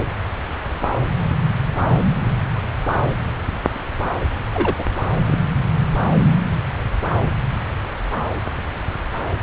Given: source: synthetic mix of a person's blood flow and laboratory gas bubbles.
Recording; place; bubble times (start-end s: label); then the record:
Doppler ultrasound of blood flow; subclavian vein
4.52-4.75 s: bubbles
4.78-4.84 s: bubbles
5.18-5.38 s: bubbles
From the record:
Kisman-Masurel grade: 212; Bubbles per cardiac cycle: several, 3 to 8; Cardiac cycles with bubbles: 1 to 10%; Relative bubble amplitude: moderate (0.250 to 0.450); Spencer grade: 1 (occasional bubble signal discernible with the cardiac motion signal, with majority of cardiac periods free of bubbles); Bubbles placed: anywhere in the cardiac cycle